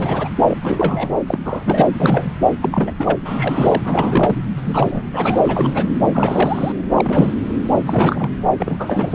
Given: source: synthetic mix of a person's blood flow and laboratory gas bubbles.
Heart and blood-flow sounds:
Doppler ultrasound of blood flow; subclavian vein
0.00-0.28 s: bubbles
0.48-0.58 s: bubbles
0.62-1.10 s: bubbles
1.27-1.39 s: bubbles
1.45-1.90 s: bubbles
2.00-2.32 s: bubbles
2.62-2.95 s: bubbles
2.98-3.18 s: bubbles
3.25-3.82 s: bubbles
3.85-4.36 s: bubbles
4.57-5.02 s: bubbles
5.12-5.41 s: bubbles
5.45-5.85 s: bubbles
6.12-6.72 s: bubbles
6.96-7.33 s: bubbles
7.86-8.30 s: bubbles
8.59-9.15 s: bubbles
From the record:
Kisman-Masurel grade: 342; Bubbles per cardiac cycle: rolling drumbeat, 9 or more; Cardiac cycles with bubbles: 100%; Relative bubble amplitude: moderate (0.250 to 0.450); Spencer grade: 3 (all of the cardiac periods contain showers or single bubble signals, but not dominating or overriding the cardiac motion signals); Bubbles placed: anywhere in the cardiac cycle

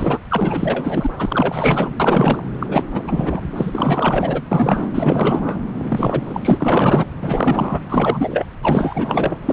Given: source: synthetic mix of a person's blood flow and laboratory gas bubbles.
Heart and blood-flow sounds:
Doppler ultrasound of blood flow; subclavian vein
0.00-0.19 s: bubbles
0.30-1.11 s: bubbles
1.18-1.93 s: bubbles
1.99-2.43 s: bubbles
2.59-2.83 s: bubbles
2.93-3.41 s: bubbles
3.56-4.42 s: bubbles
4.51-4.86 s: bubbles
4.94-5.61 s: bubbles
5.82-7.07 s: bubbles
7.21-7.80 s: bubbles
7.90-8.46 s: bubbles
8.62-9.36 s: bubbles
9.41-9.53 s: bubbles
From the record:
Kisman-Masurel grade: 444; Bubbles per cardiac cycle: continuous sound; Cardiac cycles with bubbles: 100%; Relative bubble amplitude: maximal (0.775 to 0.999); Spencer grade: 4 (maximum detectable bubble signal sounding continuously throughout systole and diastole of every cardiac period, and overriding the amplitude of the normal cardiac signals); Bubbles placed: anywhere in the cardiac cycle

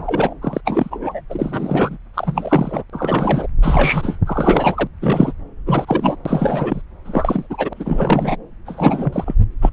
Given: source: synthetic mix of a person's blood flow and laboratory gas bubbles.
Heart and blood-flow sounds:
Doppler ultrasound of blood flow; subclavian vein
0.00-0.34 s: bubbles
0.41-0.61 s: bubbles
0.65-1.21 s: bubbles
1.29-1.97 s: bubbles
2.14-2.83 s: bubbles
2.89-3.46 s: bubbles
3.62-4.18 s: bubbles
4.25-4.88 s: bubbles
5.01-5.33 s: bubbles
5.66-6.16 s: bubbles
6.25-6.81 s: bubbles
7.05-7.46 s: bubbles
7.50-7.73 s: bubbles
7.75-8.37 s: bubbles
8.65-9.35 s: bubbles
9.62-9.70 s: bubbles
From the record:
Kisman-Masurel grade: 343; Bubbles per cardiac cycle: rolling drumbeat, 9 or more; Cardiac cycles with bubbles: 100%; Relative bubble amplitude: loud (0.450 to 0.775); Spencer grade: 3 (all of the cardiac periods contain showers or single bubble signals, but not dominating or overriding the cardiac motion signals); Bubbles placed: anywhere in the cardiac cycle

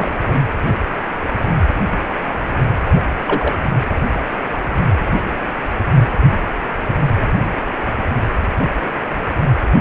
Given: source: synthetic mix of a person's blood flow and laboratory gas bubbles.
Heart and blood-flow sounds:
Doppler ultrasound of blood flow; precordium
0.00-0.12 s: bubbles
2.96-3.02 s: bubbles
3.27-3.53 s: bubbles
From the record:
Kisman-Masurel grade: 123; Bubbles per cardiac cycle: 1 to 2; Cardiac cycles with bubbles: 10 to 50%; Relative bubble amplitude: loud (0.450 to 0.775); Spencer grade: 2 (many but less than half of the cardiac periods contain bubble signals, singularly or in groups); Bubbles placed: anywhere in the cardiac cycle

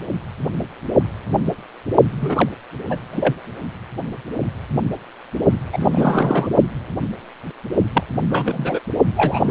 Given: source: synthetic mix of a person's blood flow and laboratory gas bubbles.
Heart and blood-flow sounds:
Doppler ultrasound of blood flow; precordium
2.19-2.49 s: bubbles
2.90-2.99 s: bubbles
3.12-3.35 s: bubbles
5.72-6.47 s: bubbles
7.94-8.04 s: bubbles
8.29-8.80 s: bubbles
9.16-9.51 s: bubbles
From the record:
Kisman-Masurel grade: 222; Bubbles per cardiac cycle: several, 3 to 8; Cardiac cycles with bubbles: 10 to 50%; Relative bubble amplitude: moderate (0.250 to 0.450); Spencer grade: 2 (many but less than half of the cardiac periods contain bubble signals, singularly or in groups); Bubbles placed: only in the low amplitude regions of the cardiac cycle

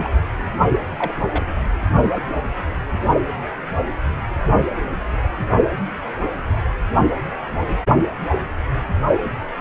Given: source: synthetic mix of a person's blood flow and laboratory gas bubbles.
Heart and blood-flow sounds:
Doppler ultrasound of blood flow; precordium
0.00-0.10 s: bubbles
0.98-1.12 s: bubbles
1.20-1.44 s: bubbles
From the record:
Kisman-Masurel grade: 222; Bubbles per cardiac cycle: several, 3 to 8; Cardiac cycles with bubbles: 10 to 50%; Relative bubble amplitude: moderate (0.250 to 0.450); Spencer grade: 2 (many but less than half of the cardiac periods contain bubble signals, singularly or in groups); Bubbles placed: only in the low amplitude regions of the cardiac cycle

